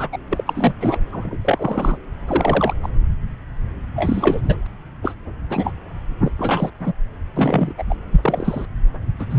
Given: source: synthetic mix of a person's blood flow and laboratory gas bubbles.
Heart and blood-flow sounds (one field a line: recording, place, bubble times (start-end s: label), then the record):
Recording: Doppler ultrasound of blood flow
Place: subclavian vein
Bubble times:
0.00-0.08 s: bubbles
0.12-0.18 s: bubbles
0.32-0.74 s: bubbles
0.80-1.01 s: bubbles
1.12-1.37 s: bubbles
1.45-1.98 s: bubbles
2.27-2.74 s: bubbles
2.83-2.89 s: bubbles
3.95-4.57 s: bubbles
5.02-5.15 s: bubbles
5.49-5.73 s: bubbles
6.23-6.31 s: bubbles
6.38-6.70 s: bubbles
6.79-6.93 s: bubbles
7.36-7.73 s: bubbles
7.77-7.83 s: bubbles
7.88-7.95 s: bubbles
8.12-8.66 s: bubbles
9.19-9.26 s: bubbles
9.30-9.39 s: bubbles
From the record:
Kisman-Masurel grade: 233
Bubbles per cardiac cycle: several, 3 to 8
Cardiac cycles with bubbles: 50 to 99%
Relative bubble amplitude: loud (0.450 to 0.775)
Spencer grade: 3 (all of the cardiac periods contain showers or single bubble signals, but not dominating or overriding the cardiac motion signals)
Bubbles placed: anywhere in the cardiac cycle